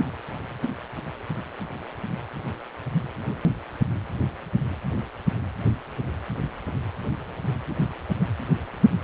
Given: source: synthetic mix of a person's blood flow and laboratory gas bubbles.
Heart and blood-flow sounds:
Doppler ultrasound of blood flow; precordium
no bubbles
From the record:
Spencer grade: 0 (complete lack of bubble signals)

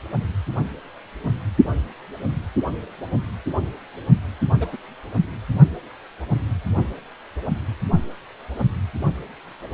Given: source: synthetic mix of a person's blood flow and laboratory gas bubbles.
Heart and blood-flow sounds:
Doppler ultrasound of blood flow; precordium
4.60-4.67 s: bubbles
4.72-4.77 s: bubbles
From the record:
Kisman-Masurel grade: 112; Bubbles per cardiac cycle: 1 to 2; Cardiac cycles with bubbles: 1 to 10%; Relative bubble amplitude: moderate (0.250 to 0.450); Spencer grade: 1 (occasional bubble signal discernible with the cardiac motion signal, with majority of cardiac periods free of bubbles); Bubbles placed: only in the low amplitude regions of the cardiac cycle

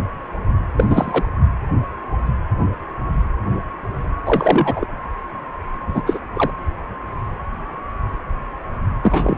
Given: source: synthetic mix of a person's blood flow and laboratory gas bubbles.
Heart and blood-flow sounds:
Doppler ultrasound of blood flow; precordium
0.76-1.25 s: bubbles
4.25-4.87 s: bubbles
5.87-6.19 s: bubbles
6.35-6.51 s: bubbles
9.03-9.37 s: bubbles
From the record:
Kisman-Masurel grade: 223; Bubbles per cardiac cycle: several, 3 to 8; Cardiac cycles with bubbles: 10 to 50%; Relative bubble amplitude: loud (0.450 to 0.775); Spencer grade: 2 (many but less than half of the cardiac periods contain bubble signals, singularly or in groups); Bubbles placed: anywhere in the cardiac cycle

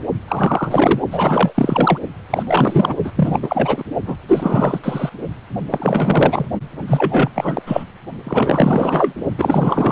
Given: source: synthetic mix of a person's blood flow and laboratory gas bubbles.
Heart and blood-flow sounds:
Doppler ultrasound of blood flow; precordium
0.28-1.00 s: bubbles
1.10-1.98 s: bubbles
2.30-2.44 s: bubbles
2.47-2.94 s: bubbles
3.04-3.12 s: bubbles
3.15-3.40 s: bubbles
3.42-3.83 s: bubbles
4.07-4.17 s: bubbles
4.28-4.80 s: bubbles
4.83-5.09 s: bubbles
5.70-6.46 s: bubbles
6.87-7.29 s: bubbles
7.34-7.62 s: bubbles
7.66-7.84 s: bubbles
8.25-9.14 s: bubbles
9.38-9.91 s: bubbles
From the record:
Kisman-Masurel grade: 444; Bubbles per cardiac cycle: continuous sound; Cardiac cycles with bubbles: 100%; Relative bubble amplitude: maximal (0.775 to 0.999); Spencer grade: 4 (maximum detectable bubble signal sounding continuously throughout systole and diastole of every cardiac period, and overriding the amplitude of the normal cardiac signals); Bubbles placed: only in the low amplitude regions of the cardiac cycle

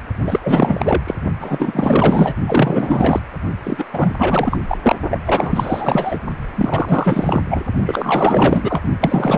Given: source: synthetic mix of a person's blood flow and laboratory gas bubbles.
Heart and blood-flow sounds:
Doppler ultrasound of blood flow; precordium
0.24-1.03 s: bubbles
1.06-1.15 s: bubbles
1.41-2.34 s: bubbles
2.47-3.21 s: bubbles
3.63-3.85 s: bubbles
3.92-4.12 s: bubbles
4.18-4.59 s: bubbles
4.68-4.78 s: bubbles
4.82-4.96 s: bubbles
5.10-5.19 s: bubbles
5.25-6.18 s: bubbles
6.56-7.42 s: bubbles
7.50-7.62 s: bubbles
7.85-8.83 s: bubbles
9.00-9.38 s: bubbles
From the record:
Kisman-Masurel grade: 444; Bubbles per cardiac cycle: continuous sound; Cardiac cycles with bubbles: 100%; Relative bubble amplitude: maximal (0.775 to 0.999); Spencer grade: 4 (maximum detectable bubble signal sounding continuously throughout systole and diastole of every cardiac period, and overriding the amplitude of the normal cardiac signals); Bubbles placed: only in the low amplitude regions of the cardiac cycle

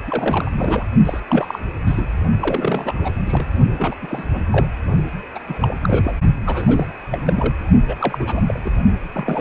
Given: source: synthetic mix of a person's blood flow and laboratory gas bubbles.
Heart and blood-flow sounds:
Doppler ultrasound of blood flow; precordium
0.07-0.52 s: bubbles
0.57-0.84 s: bubbles
1.05-1.20 s: bubbles
1.29-1.59 s: bubbles
1.87-2.06 s: bubbles
2.42-2.94 s: bubbles
3.04-3.12 s: bubbles
3.25-3.47 s: bubbles
3.77-3.95 s: bubbles
4.02-4.24 s: bubbles
4.33-4.41 s: bubbles
4.50-4.67 s: bubbles
5.34-5.39 s: bubbles
5.48-5.76 s: bubbles
5.82-6.17 s: bubbles
6.46-6.86 s: bubbles
7.12-7.19 s: bubbles
7.25-7.54 s: bubbles
7.86-8.41 s: bubbles
8.47-8.59 s: bubbles
8.64-8.71 s: bubbles
9.14-9.41 s: bubbles
From the record:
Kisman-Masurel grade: 342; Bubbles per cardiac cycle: rolling drumbeat, 9 or more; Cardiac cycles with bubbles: 100%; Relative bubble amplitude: moderate (0.250 to 0.450); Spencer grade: 3 (all of the cardiac periods contain showers or single bubble signals, but not dominating or overriding the cardiac motion signals); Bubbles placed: only in the low amplitude regions of the cardiac cycle

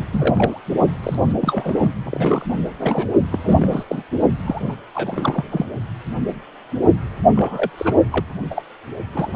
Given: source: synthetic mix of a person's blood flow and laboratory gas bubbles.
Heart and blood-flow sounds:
Doppler ultrasound of blood flow; precordium
0.11-0.61 s: bubbles
1.03-1.34 s: bubbles
1.41-1.90 s: bubbles
2.04-2.44 s: bubbles
2.50-2.58 s: bubbles
2.79-3.08 s: bubbles
3.31-3.83 s: bubbles
3.89-4.03 s: bubbles
4.45-4.75 s: bubbles
4.94-5.45 s: bubbles
5.50-5.66 s: bubbles
7.35-7.70 s: bubbles
7.78-7.94 s: bubbles
8.11-8.25 s: bubbles
8.51-8.62 s: bubbles
9.13-9.36 s: bubbles
From the record:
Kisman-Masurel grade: 232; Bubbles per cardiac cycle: several, 3 to 8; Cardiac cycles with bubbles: 50 to 99%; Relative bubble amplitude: moderate (0.250 to 0.450); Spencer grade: 3 (all of the cardiac periods contain showers or single bubble signals, but not dominating or overriding the cardiac motion signals); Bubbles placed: only in the low amplitude regions of the cardiac cycle

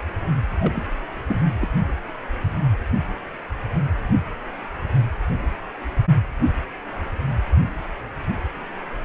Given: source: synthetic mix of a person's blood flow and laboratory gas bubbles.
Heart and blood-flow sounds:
Doppler ultrasound of blood flow; precordium
0.59-0.86 s: bubbles
1.27-1.41 s: bubbles
1.60-1.69 s: bubbles
From the record:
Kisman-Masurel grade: 211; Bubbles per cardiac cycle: several, 3 to 8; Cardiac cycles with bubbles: 1 to 10%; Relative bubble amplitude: barely perceptible (0.100 to 0.250); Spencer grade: 1 (occasional bubble signal discernible with the cardiac motion signal, with majority of cardiac periods free of bubbles); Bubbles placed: anywhere in the cardiac cycle

